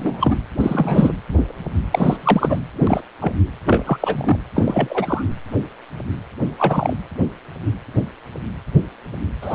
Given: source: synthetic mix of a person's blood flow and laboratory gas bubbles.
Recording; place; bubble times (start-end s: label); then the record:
Doppler ultrasound of blood flow; precordium
0.00-0.36 s: bubbles
0.60-1.13 s: bubbles
1.91-2.17 s: bubbles
2.21-2.60 s: bubbles
2.83-3.01 s: bubbles
3.21-3.32 s: bubbles
3.64-4.37 s: bubbles
4.53-5.23 s: bubbles
6.58-6.93 s: bubbles
9.41-9.55 s: bubbles
From the record:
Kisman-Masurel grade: 233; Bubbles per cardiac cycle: several, 3 to 8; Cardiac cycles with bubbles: 50 to 99%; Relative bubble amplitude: loud (0.450 to 0.775); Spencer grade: 3 (all of the cardiac periods contain showers or single bubble signals, but not dominating or overriding the cardiac motion signals); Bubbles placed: anywhere in the cardiac cycle